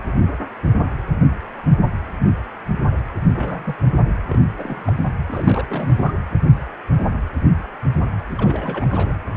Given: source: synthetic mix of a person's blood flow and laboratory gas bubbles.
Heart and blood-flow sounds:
Doppler ultrasound of blood flow; precordium
3.34-3.75 s: bubbles
4.29-4.44 s: bubbles
4.55-4.93 s: bubbles
4.96-5.05 s: bubbles
5.29-5.66 s: bubbles
5.68-6.12 s: bubbles
8.31-8.87 s: bubbles
8.90-9.12 s: bubbles
From the record:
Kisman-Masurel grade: 221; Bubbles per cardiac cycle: several, 3 to 8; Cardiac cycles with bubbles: 10 to 50%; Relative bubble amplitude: barely perceptible (0.100 to 0.250); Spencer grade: 2 (many but less than half of the cardiac periods contain bubble signals, singularly or in groups); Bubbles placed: anywhere in the cardiac cycle

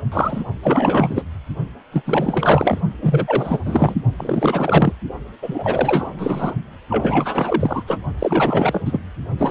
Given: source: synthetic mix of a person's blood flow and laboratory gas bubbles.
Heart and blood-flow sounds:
Doppler ultrasound of blood flow; precordium
0.00-0.02 s: bubbles
0.12-0.44 s: bubbles
0.62-1.23 s: bubbles
1.92-2.02 s: bubbles
2.05-2.81 s: bubbles
3.02-3.59 s: bubbles
3.65-3.94 s: bubbles
4.17-4.93 s: bubbles
5.42-6.54 s: bubbles
6.89-7.83 s: bubbles
7.87-8.01 s: bubbles
8.19-8.81 s: bubbles
8.85-9.00 s: bubbles
9.38-9.51 s: bubbles
From the record:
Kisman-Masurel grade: 444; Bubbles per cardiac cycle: continuous sound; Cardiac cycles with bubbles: 100%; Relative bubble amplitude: maximal (0.775 to 0.999); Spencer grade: 4 (maximum detectable bubble signal sounding continuously throughout systole and diastole of every cardiac period, and overriding the amplitude of the normal cardiac signals); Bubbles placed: only in the low amplitude regions of the cardiac cycle

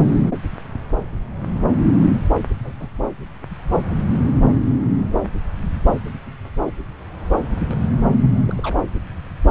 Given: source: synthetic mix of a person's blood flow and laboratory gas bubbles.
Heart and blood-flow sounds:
Doppler ultrasound of blood flow; subclavian vein
2.65-2.72 s: bubbles
2.79-2.89 s: bubbles
7.70-7.75 s: bubbles
8.47-8.54 s: bubbles
8.57-8.60 s: bubbles
8.63-8.78 s: bubbles
8.82-8.84 s: bubbles
From the record:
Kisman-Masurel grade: 121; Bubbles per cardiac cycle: 1 to 2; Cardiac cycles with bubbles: 10 to 50%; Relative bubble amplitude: barely perceptible (0.100 to 0.250); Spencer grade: 2 (many but less than half of the cardiac periods contain bubble signals, singularly or in groups); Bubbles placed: anywhere in the cardiac cycle

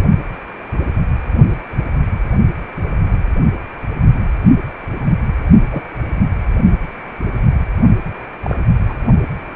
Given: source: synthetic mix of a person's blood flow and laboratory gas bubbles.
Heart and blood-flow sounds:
Doppler ultrasound of blood flow; precordium
5.71-5.83 s: bubbles
8.42-8.57 s: bubbles
8.86-8.94 s: bubbles
From the record:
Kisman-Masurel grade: 122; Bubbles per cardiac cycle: 1 to 2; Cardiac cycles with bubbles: 10 to 50%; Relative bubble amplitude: moderate (0.250 to 0.450); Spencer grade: 2 (many but less than half of the cardiac periods contain bubble signals, singularly or in groups); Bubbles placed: only in the low amplitude regions of the cardiac cycle

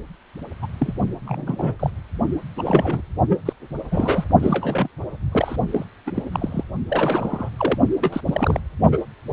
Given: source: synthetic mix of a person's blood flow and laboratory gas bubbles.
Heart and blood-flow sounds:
Doppler ultrasound of blood flow; precordium
0.62-0.67 s: bubbles
0.79-0.93 s: bubbles
1.26-1.75 s: bubbles
1.79-1.90 s: bubbles
2.57-3.01 s: bubbles
3.29-3.40 s: bubbles
3.45-3.53 s: bubbles
3.91-4.26 s: bubbles
4.39-4.88 s: bubbles
5.32-5.56 s: bubbles
5.71-5.84 s: bubbles
6.06-6.11 s: bubbles
6.14-6.22 s: bubbles
6.32-6.63 s: bubbles
6.88-7.50 s: bubbles
7.57-7.78 s: bubbles
8.01-8.21 s: bubbles
8.26-8.60 s: bubbles
8.91-9.04 s: bubbles
From the record:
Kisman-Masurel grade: 242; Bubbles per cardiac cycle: several, 3 to 8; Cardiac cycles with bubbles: 100%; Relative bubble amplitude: moderate (0.250 to 0.450); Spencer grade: 3 (all of the cardiac periods contain showers or single bubble signals, but not dominating or overriding the cardiac motion signals); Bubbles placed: only in the low amplitude regions of the cardiac cycle

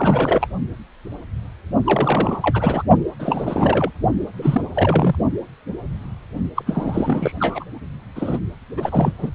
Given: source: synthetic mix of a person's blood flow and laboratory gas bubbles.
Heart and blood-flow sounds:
Doppler ultrasound of blood flow; precordium
0.00-0.47 s: bubbles
1.85-2.83 s: bubbles
3.19-3.91 s: bubbles
4.38-4.67 s: bubbles
4.74-5.16 s: bubbles
6.56-6.62 s: bubbles
6.66-7.32 s: bubbles
7.40-7.64 s: bubbles
8.15-8.38 s: bubbles
8.76-9.13 s: bubbles
9.18-9.30 s: bubbles
From the record:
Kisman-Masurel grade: 332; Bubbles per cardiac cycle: rolling drumbeat, 9 or more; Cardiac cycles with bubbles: 50 to 99%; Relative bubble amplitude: moderate (0.250 to 0.450); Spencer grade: 3 (all of the cardiac periods contain showers or single bubble signals, but not dominating or overriding the cardiac motion signals); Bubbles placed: only in the low amplitude regions of the cardiac cycle

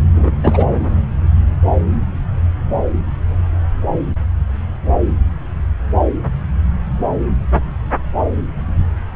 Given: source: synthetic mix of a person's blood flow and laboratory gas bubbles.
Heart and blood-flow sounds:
Doppler ultrasound of blood flow; subclavian vein
0.14-0.31 s: bubbles
0.43-0.75 s: bubbles
From the record:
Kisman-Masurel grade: 213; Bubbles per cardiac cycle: several, 3 to 8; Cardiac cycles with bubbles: 1 to 10%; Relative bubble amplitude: loud (0.450 to 0.775); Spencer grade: 1 (occasional bubble signal discernible with the cardiac motion signal, with majority of cardiac periods free of bubbles); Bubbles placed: anywhere in the cardiac cycle

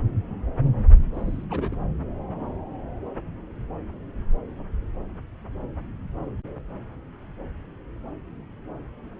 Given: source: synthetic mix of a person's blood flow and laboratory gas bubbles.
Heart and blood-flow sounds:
Doppler ultrasound of blood flow; subclavian vein
1.14-1.46 s: bubbles
1.50-1.76 s: bubbles
From the record:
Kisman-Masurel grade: 211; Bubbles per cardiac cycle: several, 3 to 8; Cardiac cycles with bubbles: 1 to 10%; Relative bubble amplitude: barely perceptible (0.100 to 0.250); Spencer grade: 1 (occasional bubble signal discernible with the cardiac motion signal, with majority of cardiac periods free of bubbles); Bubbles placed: anywhere in the cardiac cycle

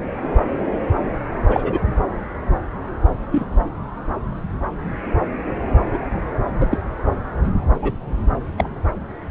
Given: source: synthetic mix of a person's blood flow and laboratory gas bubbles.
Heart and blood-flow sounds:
Doppler ultrasound of blood flow; subclavian vein
1.47-1.78 s: bubbles
3.31-3.46 s: bubbles
5.93-5.98 s: bubbles
6.60-6.77 s: bubbles
7.82-7.92 s: bubbles
8.58-8.70 s: bubbles
From the record:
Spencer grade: 2 (many but less than half of the cardiac periods contain bubble signals, singularly or in groups); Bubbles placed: anywhere in the cardiac cycle

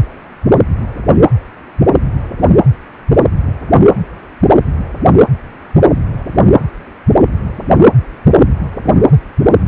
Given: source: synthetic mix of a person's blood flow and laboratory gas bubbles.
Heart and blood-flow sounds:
Doppler ultrasound of blood flow; precordium
8.82-8.93 s: bubbles
From the record:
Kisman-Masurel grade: 111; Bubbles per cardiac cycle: 1 to 2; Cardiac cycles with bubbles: 1 to 10%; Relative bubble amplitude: barely perceptible (0.100 to 0.250); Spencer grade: 1 (occasional bubble signal discernible with the cardiac motion signal, with majority of cardiac periods free of bubbles); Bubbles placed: anywhere in the cardiac cycle

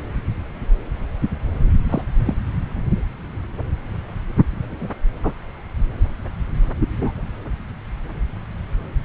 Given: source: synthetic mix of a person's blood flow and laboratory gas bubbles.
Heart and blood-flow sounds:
Doppler ultrasound of blood flow; subclavian vein
1.89-2.02 s: bubbles
2.25-2.34 s: bubbles
4.61-4.94 s: bubbles
5.23-5.33 s: bubbles
6.79-7.23 s: bubbles
From the record:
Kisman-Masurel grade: 122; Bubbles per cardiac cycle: 1 to 2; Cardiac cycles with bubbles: 10 to 50%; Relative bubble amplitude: moderate (0.250 to 0.450); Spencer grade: 2 (many but less than half of the cardiac periods contain bubble signals, singularly or in groups); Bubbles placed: anywhere in the cardiac cycle

